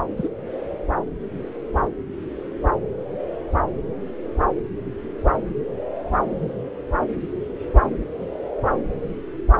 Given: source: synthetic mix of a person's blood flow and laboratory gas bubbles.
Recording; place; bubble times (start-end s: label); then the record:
Doppler ultrasound of blood flow; subclavian vein
0.17-0.29 s: bubbles
From the record:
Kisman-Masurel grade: 112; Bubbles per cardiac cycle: 1 to 2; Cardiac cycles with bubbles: 1 to 10%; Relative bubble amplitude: moderate (0.250 to 0.450); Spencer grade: 1 (occasional bubble signal discernible with the cardiac motion signal, with majority of cardiac periods free of bubbles); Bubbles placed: anywhere in the cardiac cycle